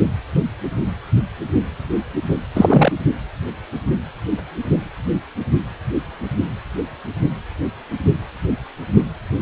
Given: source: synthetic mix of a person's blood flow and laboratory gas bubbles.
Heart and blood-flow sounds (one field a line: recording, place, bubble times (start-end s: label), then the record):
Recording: Doppler ultrasound of blood flow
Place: precordium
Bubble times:
2.55-2.93 s: bubbles
From the record:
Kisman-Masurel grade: 213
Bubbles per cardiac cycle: several, 3 to 8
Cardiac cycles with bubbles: 1 to 10%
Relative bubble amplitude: loud (0.450 to 0.775)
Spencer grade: 1 (occasional bubble signal discernible with the cardiac motion signal, with majority of cardiac periods free of bubbles)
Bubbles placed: only in the low amplitude regions of the cardiac cycle